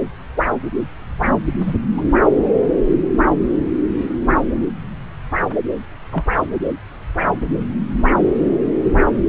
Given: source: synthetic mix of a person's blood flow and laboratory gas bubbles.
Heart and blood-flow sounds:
Doppler ultrasound of blood flow; subclavian vein
1.66-1.74 s: bubbles
1.97-2.02 s: bubbles
6.11-6.23 s: bubbles
From the record:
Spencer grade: 2 (many but less than half of the cardiac periods contain bubble signals, singularly or in groups); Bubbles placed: anywhere in the cardiac cycle

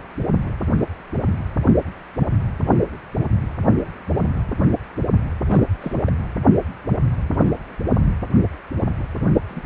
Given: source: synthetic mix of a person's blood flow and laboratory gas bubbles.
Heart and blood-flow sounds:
Doppler ultrasound of blood flow; precordium
5.49-5.65 s: bubbles
5.82-6.12 s: bubbles
9.49-9.64 s: bubbles
From the record:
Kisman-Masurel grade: 221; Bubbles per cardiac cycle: several, 3 to 8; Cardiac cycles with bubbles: 10 to 50%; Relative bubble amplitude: barely perceptible (0.100 to 0.250); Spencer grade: 2 (many but less than half of the cardiac periods contain bubble signals, singularly or in groups); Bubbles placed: anywhere in the cardiac cycle

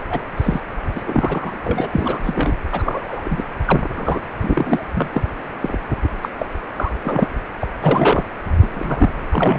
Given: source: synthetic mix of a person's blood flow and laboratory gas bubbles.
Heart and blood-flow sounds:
Doppler ultrasound of blood flow; precordium
0.10-0.21 s: bubbles
0.37-0.60 s: bubbles
0.96-1.03 s: bubbles
1.06-1.54 s: bubbles
1.65-1.88 s: bubbles
1.93-2.20 s: bubbles
2.23-2.53 s: bubbles
2.71-3.44 s: bubbles
3.65-3.79 s: bubbles
3.96-4.20 s: bubbles
4.42-4.84 s: bubbles
4.95-5.09 s: bubbles
5.12-5.21 s: bubbles
5.62-5.77 s: bubbles
6.03-6.08 s: bubbles
6.22-6.29 s: bubbles
6.39-6.46 s: bubbles
6.76-6.92 s: bubbles
7.04-7.33 s: bubbles
7.60-7.67 s: bubbles
7.82-8.25 s: bubbles
8.61-9.12 s: bubbles
9.31-9.59 s: bubbles
From the record:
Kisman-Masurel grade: 242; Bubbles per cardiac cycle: several, 3 to 8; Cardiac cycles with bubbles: 100%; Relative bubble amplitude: moderate (0.250 to 0.450); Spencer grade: 3 (all of the cardiac periods contain showers or single bubble signals, but not dominating or overriding the cardiac motion signals); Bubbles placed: anywhere in the cardiac cycle

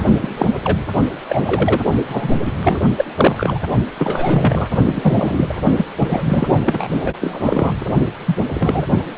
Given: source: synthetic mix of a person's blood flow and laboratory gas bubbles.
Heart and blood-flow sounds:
Doppler ultrasound of blood flow; precordium
0.21-0.46 s: bubbles
0.64-0.78 s: bubbles
1.29-1.80 s: bubbles
2.07-2.33 s: bubbles
2.38-2.52 s: bubbles
2.62-2.80 s: bubbles
2.96-3.59 s: bubbles
3.97-4.67 s: bubbles
4.85-5.55 s: bubbles
5.77-5.84 s: bubbles
5.99-6.58 s: bubbles
6.66-6.88 s: bubbles
7.04-7.14 s: bubbles
7.21-7.73 s: bubbles
7.80-7.85 s: bubbles
8.26-8.36 s: bubbles
8.54-8.86 s: bubbles
From the record:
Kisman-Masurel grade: 243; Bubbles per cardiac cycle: several, 3 to 8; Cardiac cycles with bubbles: 100%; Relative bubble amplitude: loud (0.450 to 0.775); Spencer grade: 3 (all of the cardiac periods contain showers or single bubble signals, but not dominating or overriding the cardiac motion signals); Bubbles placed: only in the low amplitude regions of the cardiac cycle

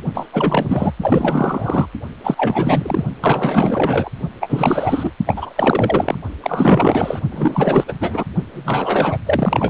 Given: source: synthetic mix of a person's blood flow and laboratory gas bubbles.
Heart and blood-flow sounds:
Doppler ultrasound of blood flow; precordium
0.14-0.27 s: bubbles
0.32-0.93 s: bubbles
1.00-1.87 s: bubbles
2.23-3.05 s: bubbles
3.21-4.11 s: bubbles
4.40-5.11 s: bubbles
5.26-5.53 s: bubbles
5.56-6.17 s: bubbles
6.42-7.20 s: bubbles
7.32-7.85 s: bubbles
7.88-7.93 s: bubbles
8.01-8.24 s: bubbles
8.53-9.18 s: bubbles
9.26-9.70 s: bubbles
From the record:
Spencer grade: 4 (maximum detectable bubble signal sounding continuously throughout systole and diastole of every cardiac period, and overriding the amplitude of the normal cardiac signals); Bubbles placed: only in the low amplitude regions of the cardiac cycle

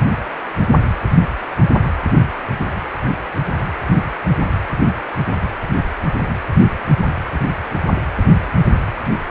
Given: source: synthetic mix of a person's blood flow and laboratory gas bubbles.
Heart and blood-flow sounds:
Doppler ultrasound of blood flow; precordium
no bubbles
From the record:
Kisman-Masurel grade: 000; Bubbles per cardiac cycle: 0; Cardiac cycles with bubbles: 0%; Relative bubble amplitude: no bubbles discernible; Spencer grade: 0 (complete lack of bubble signals)

